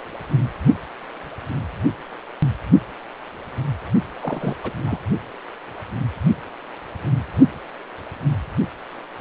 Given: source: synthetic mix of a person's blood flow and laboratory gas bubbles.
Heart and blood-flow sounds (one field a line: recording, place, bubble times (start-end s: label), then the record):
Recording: Doppler ultrasound of blood flow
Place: precordium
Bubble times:
4.21-4.54 s: bubbles
4.62-4.72 s: bubbles
4.87-5.01 s: bubbles
From the record:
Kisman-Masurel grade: 211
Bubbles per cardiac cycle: several, 3 to 8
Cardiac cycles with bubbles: 1 to 10%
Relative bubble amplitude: barely perceptible (0.100 to 0.250)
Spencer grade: 1 (occasional bubble signal discernible with the cardiac motion signal, with majority of cardiac periods free of bubbles)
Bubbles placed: only in the low amplitude regions of the cardiac cycle